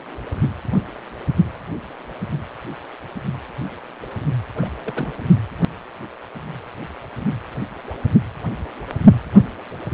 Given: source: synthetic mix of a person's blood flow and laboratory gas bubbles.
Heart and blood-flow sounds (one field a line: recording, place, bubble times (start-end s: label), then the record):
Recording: Doppler ultrasound of blood flow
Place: precordium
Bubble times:
4.55-4.68 s: bubbles
4.84-5.12 s: bubbles
From the record:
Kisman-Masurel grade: 211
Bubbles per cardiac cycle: several, 3 to 8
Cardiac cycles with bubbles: 1 to 10%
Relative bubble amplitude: barely perceptible (0.100 to 0.250)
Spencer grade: 1 (occasional bubble signal discernible with the cardiac motion signal, with majority of cardiac periods free of bubbles)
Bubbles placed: only in the low amplitude regions of the cardiac cycle